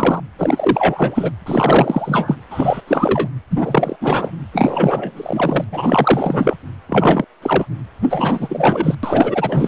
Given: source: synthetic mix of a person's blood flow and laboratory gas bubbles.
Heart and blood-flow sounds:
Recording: Doppler ultrasound of blood flow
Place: precordium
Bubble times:
0.00-0.20 s: bubbles
0.38-1.31 s: bubbles
1.46-2.35 s: bubbles
2.50-2.81 s: bubbles
2.87-3.28 s: bubbles
3.50-3.96 s: bubbles
4.00-4.31 s: bubbles
4.53-5.64 s: bubbles
5.71-6.57 s: bubbles
6.89-7.25 s: bubbles
7.42-7.66 s: bubbles
8.09-8.95 s: bubbles
9.03-9.68 s: bubbles
From the record:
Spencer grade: 3 (all of the cardiac periods contain showers or single bubble signals, but not dominating or overriding the cardiac motion signals)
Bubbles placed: anywhere in the cardiac cycle

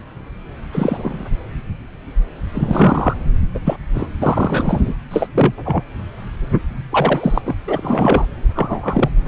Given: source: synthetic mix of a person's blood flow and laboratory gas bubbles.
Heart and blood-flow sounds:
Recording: Doppler ultrasound of blood flow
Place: subclavian vein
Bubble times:
0.72-1.24 s: bubbles
2.54-3.14 s: bubbles
3.54-3.59 s: bubbles
3.65-3.77 s: bubbles
3.94-4.08 s: bubbles
4.21-4.95 s: bubbles
5.11-5.27 s: bubbles
5.34-5.53 s: bubbles
5.65-5.84 s: bubbles
6.90-7.42 s: bubbles
7.45-7.55 s: bubbles
7.67-8.26 s: bubbles
8.55-9.10 s: bubbles
From the record:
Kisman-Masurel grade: 233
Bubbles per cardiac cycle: several, 3 to 8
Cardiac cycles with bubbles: 50 to 99%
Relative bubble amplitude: loud (0.450 to 0.775)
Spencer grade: 3 (all of the cardiac periods contain showers or single bubble signals, but not dominating or overriding the cardiac motion signals)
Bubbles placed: anywhere in the cardiac cycle

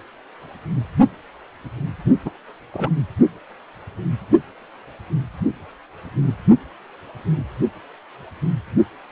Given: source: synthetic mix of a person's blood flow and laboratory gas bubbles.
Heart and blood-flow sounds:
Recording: Doppler ultrasound of blood flow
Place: precordium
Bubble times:
2.25-2.30 s: bubbles
2.74-2.89 s: bubbles
From the record:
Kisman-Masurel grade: 112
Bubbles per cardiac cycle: 1 to 2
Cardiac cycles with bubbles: 1 to 10%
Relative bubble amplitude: moderate (0.250 to 0.450)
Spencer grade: 1 (occasional bubble signal discernible with the cardiac motion signal, with majority of cardiac periods free of bubbles)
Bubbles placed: only in the low amplitude regions of the cardiac cycle

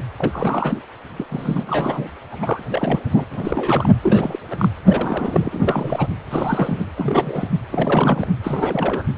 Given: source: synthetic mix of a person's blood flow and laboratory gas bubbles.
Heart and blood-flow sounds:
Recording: Doppler ultrasound of blood flow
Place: precordium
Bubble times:
0.18-0.78 s: bubbles
1.17-1.25 s: bubbles
1.29-2.07 s: bubbles
2.31-2.63 s: bubbles
2.70-3.00 s: bubbles
3.10-3.25 s: bubbles
3.31-3.94 s: bubbles
4.03-4.38 s: bubbles
4.50-4.68 s: bubbles
4.86-6.07 s: bubbles
6.31-6.84 s: bubbles
6.97-7.48 s: bubbles
7.71-8.26 s: bubbles
8.43-9.03 s: bubbles
From the record:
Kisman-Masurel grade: 342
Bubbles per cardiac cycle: rolling drumbeat, 9 or more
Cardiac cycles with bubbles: 100%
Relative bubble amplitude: moderate (0.250 to 0.450)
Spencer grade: 3 (all of the cardiac periods contain showers or single bubble signals, but not dominating or overriding the cardiac motion signals)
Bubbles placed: anywhere in the cardiac cycle

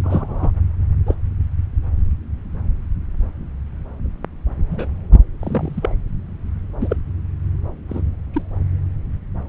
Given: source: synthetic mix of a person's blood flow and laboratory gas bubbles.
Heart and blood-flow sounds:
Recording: Doppler ultrasound of blood flow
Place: subclavian vein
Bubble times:
0.03-0.51 s: bubbles
1.05-1.14 s: bubbles
4.71-4.87 s: bubbles
5.39-5.93 s: bubbles
6.80-6.96 s: bubbles
7.88-8.02 s: bubbles
8.34-8.43 s: bubbles
From the record:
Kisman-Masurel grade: 122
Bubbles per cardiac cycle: 1 to 2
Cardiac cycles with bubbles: 10 to 50%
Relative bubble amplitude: moderate (0.250 to 0.450)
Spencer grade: 2 (many but less than half of the cardiac periods contain bubble signals, singularly or in groups)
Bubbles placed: anywhere in the cardiac cycle

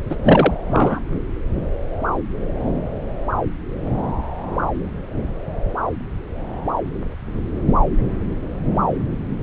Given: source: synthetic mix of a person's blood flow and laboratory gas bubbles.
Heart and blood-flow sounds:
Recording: Doppler ultrasound of blood flow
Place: subclavian vein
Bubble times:
0.09-0.15 s: bubbles
0.24-0.54 s: bubbles
0.68-1.01 s: bubbles
From the record:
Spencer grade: 2 (many but less than half of the cardiac periods contain bubble signals, singularly or in groups)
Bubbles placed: anywhere in the cardiac cycle

